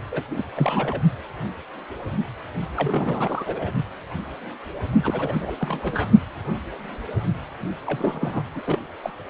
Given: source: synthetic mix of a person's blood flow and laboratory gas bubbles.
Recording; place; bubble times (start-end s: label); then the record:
Doppler ultrasound of blood flow; precordium
0.11-0.23 s: bubbles
0.31-0.44 s: bubbles
0.56-1.02 s: bubbles
2.77-3.73 s: bubbles
5.03-5.55 s: bubbles
5.60-6.09 s: bubbles
7.86-8.43 s: bubbles
8.53-8.62 s: bubbles
8.66-8.79 s: bubbles
9.03-9.11 s: bubbles
From the record:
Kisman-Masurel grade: 332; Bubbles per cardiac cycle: rolling drumbeat, 9 or more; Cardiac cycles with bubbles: 50 to 99%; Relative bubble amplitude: moderate (0.250 to 0.450); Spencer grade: 3 (all of the cardiac periods contain showers or single bubble signals, but not dominating or overriding the cardiac motion signals); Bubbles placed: only in the low amplitude regions of the cardiac cycle